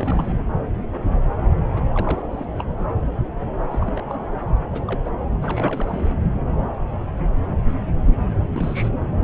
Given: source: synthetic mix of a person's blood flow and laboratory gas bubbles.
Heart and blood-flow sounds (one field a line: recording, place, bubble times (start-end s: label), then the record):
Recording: Doppler ultrasound of blood flow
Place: subclavian vein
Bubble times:
0.00-0.38 s: bubbles
1.77-1.83 s: bubbles
1.94-2.26 s: bubbles
2.31-2.46 s: bubbles
2.58-2.64 s: bubbles
2.73-3.00 s: bubbles
3.71-4.01 s: bubbles
4.08-4.24 s: bubbles
4.71-5.01 s: bubbles
5.04-5.10 s: bubbles
5.34-5.38 s: bubbles
5.42-6.15 s: bubbles
8.41-8.49 s: bubbles
8.53-8.91 s: bubbles
From the record:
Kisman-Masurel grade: 221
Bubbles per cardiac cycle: several, 3 to 8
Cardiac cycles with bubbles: 10 to 50%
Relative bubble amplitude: barely perceptible (0.100 to 0.250)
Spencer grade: 2 (many but less than half of the cardiac periods contain bubble signals, singularly or in groups)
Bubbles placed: anywhere in the cardiac cycle